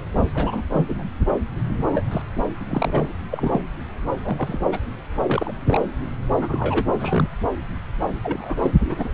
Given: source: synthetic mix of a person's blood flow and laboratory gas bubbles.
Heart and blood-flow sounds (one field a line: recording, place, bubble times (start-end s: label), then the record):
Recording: Doppler ultrasound of blood flow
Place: subclavian vein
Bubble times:
0.35-0.62 s: bubbles
0.73-1.10 s: bubbles
1.90-2.01 s: bubbles
2.11-2.22 s: bubbles
2.59-2.65 s: bubbles
2.70-3.06 s: bubbles
3.31-3.61 s: bubbles
4.24-4.66 s: bubbles
4.71-4.78 s: bubbles
5.27-5.52 s: bubbles
5.66-5.85 s: bubbles
6.41-6.85 s: bubbles
6.92-7.29 s: bubbles
8.25-8.56 s: bubbles
8.62-8.72 s: bubbles
8.83-9.09 s: bubbles
From the record:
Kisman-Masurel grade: 242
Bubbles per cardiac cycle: several, 3 to 8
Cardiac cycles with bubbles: 100%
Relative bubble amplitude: moderate (0.250 to 0.450)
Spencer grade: 3 (all of the cardiac periods contain showers or single bubble signals, but not dominating or overriding the cardiac motion signals)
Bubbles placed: anywhere in the cardiac cycle